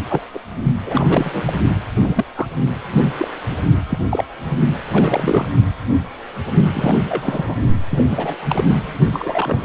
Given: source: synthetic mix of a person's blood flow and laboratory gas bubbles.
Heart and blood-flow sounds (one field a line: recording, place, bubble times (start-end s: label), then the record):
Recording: Doppler ultrasound of blood flow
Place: precordium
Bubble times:
0.09-0.20 s: bubbles
0.33-0.40 s: bubbles
0.86-1.53 s: bubbles
1.95-2.25 s: bubbles
2.35-2.46 s: bubbles
3.18-3.28 s: bubbles
3.51-3.57 s: bubbles
3.89-3.98 s: bubbles
4.10-4.25 s: bubbles
4.92-5.48 s: bubbles
6.74-6.96 s: bubbles
7.08-7.55 s: bubbles
7.90-8.36 s: bubbles
8.49-8.94 s: bubbles
9.12-9.65 s: bubbles
From the record:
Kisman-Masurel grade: 232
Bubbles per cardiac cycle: several, 3 to 8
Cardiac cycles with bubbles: 50 to 99%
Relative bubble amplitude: moderate (0.250 to 0.450)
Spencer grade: 3 (all of the cardiac periods contain showers or single bubble signals, but not dominating or overriding the cardiac motion signals)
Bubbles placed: only in the low amplitude regions of the cardiac cycle